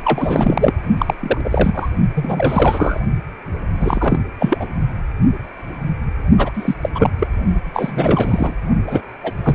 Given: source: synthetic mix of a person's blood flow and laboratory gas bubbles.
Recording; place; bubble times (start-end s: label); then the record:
Doppler ultrasound of blood flow; precordium
0.03-0.72 s: bubbles
0.98-1.14 s: bubbles
1.20-1.41 s: bubbles
1.44-1.89 s: bubbles
2.15-3.00 s: bubbles
3.80-4.20 s: bubbles
4.40-4.68 s: bubbles
6.38-6.52 s: bubbles
6.54-6.75 s: bubbles
6.81-6.90 s: bubbles
6.95-7.10 s: bubbles
7.19-7.27 s: bubbles
7.73-8.55 s: bubbles
8.87-9.01 s: bubbles
9.24-9.33 s: bubbles
9.44-9.55 s: bubbles
From the record:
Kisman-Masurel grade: 333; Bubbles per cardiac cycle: rolling drumbeat, 9 or more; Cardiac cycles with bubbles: 50 to 99%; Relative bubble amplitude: loud (0.450 to 0.775); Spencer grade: 3 (all of the cardiac periods contain showers or single bubble signals, but not dominating or overriding the cardiac motion signals); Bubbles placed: only in the low amplitude regions of the cardiac cycle